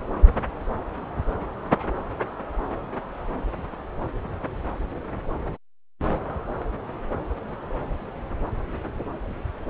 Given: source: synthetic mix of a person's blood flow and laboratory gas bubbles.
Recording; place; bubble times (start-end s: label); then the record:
Doppler ultrasound of blood flow; subclavian vein
no bubbles
From the record:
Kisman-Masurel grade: 000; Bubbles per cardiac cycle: 0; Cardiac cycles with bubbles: 0%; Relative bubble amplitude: no bubbles discernible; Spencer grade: 0 (complete lack of bubble signals)